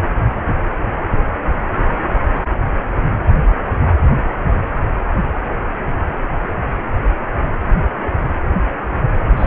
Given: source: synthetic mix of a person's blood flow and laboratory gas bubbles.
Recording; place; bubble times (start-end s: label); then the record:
Doppler ultrasound of blood flow; precordium
9.36-9.47 s: bubbles
From the record:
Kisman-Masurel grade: 123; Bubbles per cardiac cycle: 1 to 2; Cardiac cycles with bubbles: 10 to 50%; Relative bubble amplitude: loud (0.450 to 0.775); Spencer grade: 2 (many but less than half of the cardiac periods contain bubble signals, singularly or in groups); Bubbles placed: anywhere in the cardiac cycle